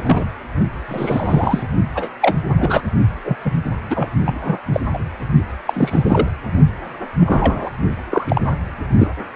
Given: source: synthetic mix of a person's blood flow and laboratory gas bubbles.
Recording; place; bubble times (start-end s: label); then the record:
Doppler ultrasound of blood flow; precordium
0.00-0.26 s: bubbles
0.88-1.63 s: bubbles
1.95-2.08 s: bubbles
2.21-2.36 s: bubbles
2.57-2.81 s: bubbles
3.24-3.36 s: bubbles
3.44-3.51 s: bubbles
3.90-4.09 s: bubbles
4.25-4.59 s: bubbles
4.72-4.80 s: bubbles
4.93-4.98 s: bubbles
5.66-6.29 s: bubbles
7.20-7.70 s: bubbles
8.10-8.57 s: bubbles
8.98-9.07 s: bubbles
From the record:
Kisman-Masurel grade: 243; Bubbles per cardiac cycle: several, 3 to 8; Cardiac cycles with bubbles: 100%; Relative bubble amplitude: loud (0.450 to 0.775); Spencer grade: 3 (all of the cardiac periods contain showers or single bubble signals, but not dominating or overriding the cardiac motion signals); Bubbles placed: only in the low amplitude regions of the cardiac cycle